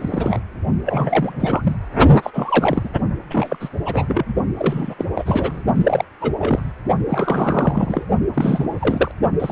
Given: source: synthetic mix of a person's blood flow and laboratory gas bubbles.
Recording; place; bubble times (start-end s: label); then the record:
Doppler ultrasound of blood flow; precordium
0.00-0.41 s: bubbles
0.85-1.76 s: bubbles
2.22-2.30 s: bubbles
2.33-2.88 s: bubbles
3.29-3.57 s: bubbles
3.59-3.69 s: bubbles
3.85-4.34 s: bubbles
4.58-4.94 s: bubbles
4.98-5.04 s: bubbles
5.15-5.63 s: bubbles
5.75-6.04 s: bubbles
6.21-6.32 s: bubbles
6.38-6.71 s: bubbles
7.08-8.06 s: bubbles
8.34-9.12 s: bubbles
9.40-9.52 s: bubbles
From the record:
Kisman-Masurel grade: 342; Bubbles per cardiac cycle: rolling drumbeat, 9 or more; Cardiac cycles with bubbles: 100%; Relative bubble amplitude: moderate (0.250 to 0.450); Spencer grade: 3 (all of the cardiac periods contain showers or single bubble signals, but not dominating or overriding the cardiac motion signals); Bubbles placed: only in the low amplitude regions of the cardiac cycle